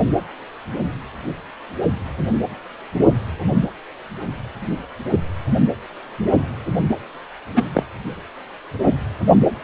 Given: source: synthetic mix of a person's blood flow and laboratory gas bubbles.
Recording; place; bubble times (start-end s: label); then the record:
Doppler ultrasound of blood flow; precordium
7.55-7.62 s: bubbles
7.74-7.84 s: bubbles
From the record:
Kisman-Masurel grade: 123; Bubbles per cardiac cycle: 1 to 2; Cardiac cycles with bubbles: 10 to 50%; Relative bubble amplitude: loud (0.450 to 0.775); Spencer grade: 2 (many but less than half of the cardiac periods contain bubble signals, singularly or in groups); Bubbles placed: anywhere in the cardiac cycle